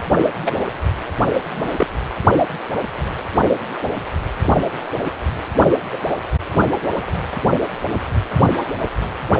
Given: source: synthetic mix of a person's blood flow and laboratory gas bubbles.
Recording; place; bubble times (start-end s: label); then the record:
Doppler ultrasound of blood flow; precordium
0.45-0.61 s: bubbles
1.50-1.68 s: bubbles
1.76-1.86 s: bubbles
5.91-5.97 s: bubbles
From the record:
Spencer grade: 2 (many but less than half of the cardiac periods contain bubble signals, singularly or in groups); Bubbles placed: only in the low amplitude regions of the cardiac cycle